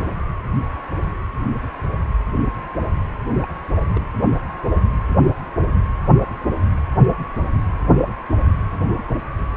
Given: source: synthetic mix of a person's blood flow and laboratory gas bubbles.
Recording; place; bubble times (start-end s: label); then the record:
Doppler ultrasound of blood flow; precordium
3.37-3.51 s: bubbles
3.94-4.00 s: bubbles
5.57-5.70 s: bubbles
8.98-9.04 s: bubbles
From the record:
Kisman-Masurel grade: 121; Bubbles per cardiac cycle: 1 to 2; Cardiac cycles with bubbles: 10 to 50%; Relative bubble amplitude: barely perceptible (0.100 to 0.250); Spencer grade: 2 (many but less than half of the cardiac periods contain bubble signals, singularly or in groups); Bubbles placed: anywhere in the cardiac cycle